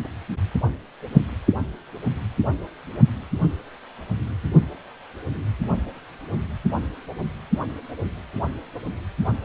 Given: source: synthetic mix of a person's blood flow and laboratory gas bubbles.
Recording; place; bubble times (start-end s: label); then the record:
Doppler ultrasound of blood flow; precordium
0.03-0.08 s: bubbles
From the record:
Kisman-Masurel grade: 111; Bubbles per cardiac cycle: 1 to 2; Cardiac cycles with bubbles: 1 to 10%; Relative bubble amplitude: barely perceptible (0.100 to 0.250); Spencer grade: 1 (occasional bubble signal discernible with the cardiac motion signal, with majority of cardiac periods free of bubbles); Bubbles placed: only in the low amplitude regions of the cardiac cycle